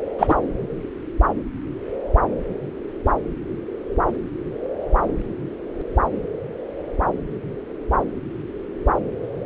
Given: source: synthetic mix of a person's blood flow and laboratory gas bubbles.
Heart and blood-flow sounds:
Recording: Doppler ultrasound of blood flow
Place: subclavian vein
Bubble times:
0.18-0.35 s: bubbles
From the record:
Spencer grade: 1 (occasional bubble signal discernible with the cardiac motion signal, with majority of cardiac periods free of bubbles)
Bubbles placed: anywhere in the cardiac cycle

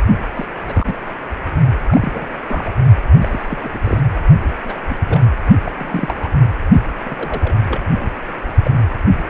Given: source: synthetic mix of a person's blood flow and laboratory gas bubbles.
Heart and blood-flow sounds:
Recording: Doppler ultrasound of blood flow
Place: precordium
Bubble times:
0.34-0.46 s: bubbles
0.67-0.95 s: bubbles
1.88-2.26 s: bubbles
2.48-2.71 s: bubbles
3.21-4.00 s: bubbles
4.65-4.83 s: bubbles
4.89-5.21 s: bubbles
5.65-5.72 s: bubbles
5.78-6.29 s: bubbles
7.06-7.15 s: bubbles
7.17-7.54 s: bubbles
7.63-7.79 s: bubbles
8.00-8.13 s: bubbles
8.64-8.71 s: bubbles
9.05-9.12 s: bubbles
From the record:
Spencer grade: 3 (all of the cardiac periods contain showers or single bubble signals, but not dominating or overriding the cardiac motion signals)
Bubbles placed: only in the low amplitude regions of the cardiac cycle

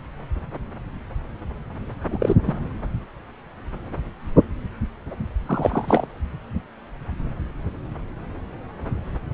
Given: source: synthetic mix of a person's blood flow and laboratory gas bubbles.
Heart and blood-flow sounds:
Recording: Doppler ultrasound of blood flow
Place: subclavian vein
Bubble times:
2.08-2.36 s: bubbles
2.44-2.54 s: bubbles
5.46-6.06 s: bubbles
From the record:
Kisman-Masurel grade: 222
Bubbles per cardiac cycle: several, 3 to 8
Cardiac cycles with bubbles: 10 to 50%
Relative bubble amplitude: moderate (0.250 to 0.450)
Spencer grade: 2 (many but less than half of the cardiac periods contain bubble signals, singularly or in groups)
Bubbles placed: anywhere in the cardiac cycle

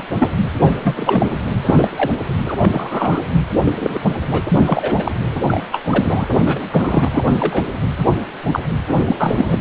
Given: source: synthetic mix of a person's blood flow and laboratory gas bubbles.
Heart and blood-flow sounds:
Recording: Doppler ultrasound of blood flow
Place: precordium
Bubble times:
0.00-0.03 s: bubbles
0.19-0.29 s: bubbles
0.60-0.76 s: bubbles
0.83-1.26 s: bubbles
1.66-1.88 s: bubbles
1.97-2.10 s: bubbles
2.46-2.54 s: bubbles
2.59-3.23 s: bubbles
3.65-4.00 s: bubbles
4.28-4.42 s: bubbles
4.48-5.12 s: bubbles
5.47-5.64 s: bubbles
5.71-5.80 s: bubbles
5.85-6.26 s: bubbles
6.45-7.25 s: bubbles
7.33-7.66 s: bubbles
8.10-8.18 s: bubbles
8.53-8.60 s: bubbles
9.07-9.16 s: bubbles
9.19-9.60 s: bubbles
From the record:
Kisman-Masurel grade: 243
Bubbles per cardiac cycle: several, 3 to 8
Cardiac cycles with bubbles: 100%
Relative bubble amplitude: loud (0.450 to 0.775)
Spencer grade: 3 (all of the cardiac periods contain showers or single bubble signals, but not dominating or overriding the cardiac motion signals)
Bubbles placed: anywhere in the cardiac cycle

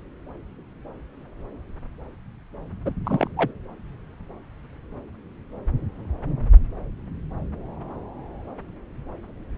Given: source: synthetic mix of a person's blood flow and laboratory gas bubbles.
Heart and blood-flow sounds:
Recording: Doppler ultrasound of blood flow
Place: subclavian vein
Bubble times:
2.85-2.94 s: bubbles
3.04-3.28 s: bubbles
3.36-3.51 s: bubbles
From the record:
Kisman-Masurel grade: 222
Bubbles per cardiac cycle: several, 3 to 8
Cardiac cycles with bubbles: 10 to 50%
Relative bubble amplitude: moderate (0.250 to 0.450)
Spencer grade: 2 (many but less than half of the cardiac periods contain bubble signals, singularly or in groups)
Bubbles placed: anywhere in the cardiac cycle

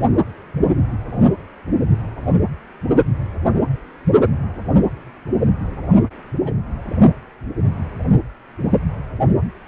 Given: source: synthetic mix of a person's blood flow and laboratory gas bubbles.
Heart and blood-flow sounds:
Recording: Doppler ultrasound of blood flow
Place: precordium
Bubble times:
6.00-6.04 s: bubbles
6.44-6.53 s: bubbles
From the record:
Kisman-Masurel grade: 121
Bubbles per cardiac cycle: 1 to 2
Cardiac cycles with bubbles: 10 to 50%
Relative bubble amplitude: barely perceptible (0.100 to 0.250)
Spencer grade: 2 (many but less than half of the cardiac periods contain bubble signals, singularly or in groups)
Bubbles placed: only in the low amplitude regions of the cardiac cycle

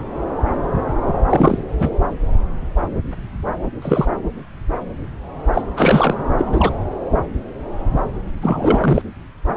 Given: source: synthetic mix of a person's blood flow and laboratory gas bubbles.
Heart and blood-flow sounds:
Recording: Doppler ultrasound of blood flow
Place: subclavian vein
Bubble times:
1.29-1.58 s: bubbles
1.79-1.89 s: bubbles
3.82-4.07 s: bubbles
5.54-5.62 s: bubbles
5.77-6.16 s: bubbles
6.38-6.72 s: bubbles
8.42-9.02 s: bubbles
From the record:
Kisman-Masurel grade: 233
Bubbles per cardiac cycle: several, 3 to 8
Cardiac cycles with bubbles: 50 to 99%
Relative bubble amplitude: loud (0.450 to 0.775)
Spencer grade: 3 (all of the cardiac periods contain showers or single bubble signals, but not dominating or overriding the cardiac motion signals)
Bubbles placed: anywhere in the cardiac cycle

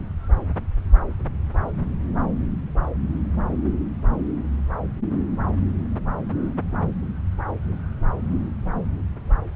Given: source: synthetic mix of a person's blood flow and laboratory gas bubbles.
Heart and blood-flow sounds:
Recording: Doppler ultrasound of blood flow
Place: subclavian vein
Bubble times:
no bubbles
From the record:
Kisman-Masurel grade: 000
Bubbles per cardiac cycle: 0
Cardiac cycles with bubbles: 0%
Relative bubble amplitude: no bubbles discernible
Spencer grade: 0 (complete lack of bubble signals)

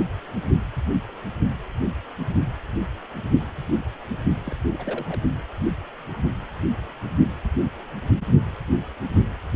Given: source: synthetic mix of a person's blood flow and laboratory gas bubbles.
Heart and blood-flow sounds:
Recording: Doppler ultrasound of blood flow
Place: precordium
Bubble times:
4.46-4.55 s: bubbles
4.78-5.20 s: bubbles
From the record:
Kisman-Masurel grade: 221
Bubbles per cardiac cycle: several, 3 to 8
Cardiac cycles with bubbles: 10 to 50%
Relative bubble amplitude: barely perceptible (0.100 to 0.250)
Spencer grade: 2 (many but less than half of the cardiac periods contain bubble signals, singularly or in groups)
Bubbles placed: only in the low amplitude regions of the cardiac cycle

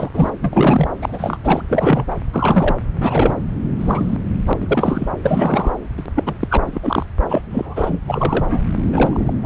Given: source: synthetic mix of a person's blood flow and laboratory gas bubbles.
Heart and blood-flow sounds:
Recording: Doppler ultrasound of blood flow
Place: subclavian vein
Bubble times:
0.00-0.09 s: bubbles
0.13-0.30 s: bubbles
0.40-0.88 s: bubbles
1.01-1.38 s: bubbles
1.44-1.62 s: bubbles
1.69-2.15 s: bubbles
2.33-2.75 s: bubbles
3.00-3.44 s: bubbles
3.79-4.17 s: bubbles
4.44-4.53 s: bubbles
4.60-5.09 s: bubbles
5.22-5.71 s: bubbles
5.97-6.03 s: bubbles
6.15-6.37 s: bubbles
6.39-6.47 s: bubbles
6.50-6.57 s: bubbles
6.66-6.80 s: bubbles
6.82-7.06 s: bubbles
7.28-7.42 s: bubbles
7.50-7.99 s: bubbles
8.05-8.62 s: bubbles
8.93-9.34 s: bubbles
9.43-9.46 s: bubbles
From the record:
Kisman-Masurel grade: 343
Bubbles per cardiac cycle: rolling drumbeat, 9 or more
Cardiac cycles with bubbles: 100%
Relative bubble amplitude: loud (0.450 to 0.775)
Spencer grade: 3 (all of the cardiac periods contain showers or single bubble signals, but not dominating or overriding the cardiac motion signals)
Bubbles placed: anywhere in the cardiac cycle

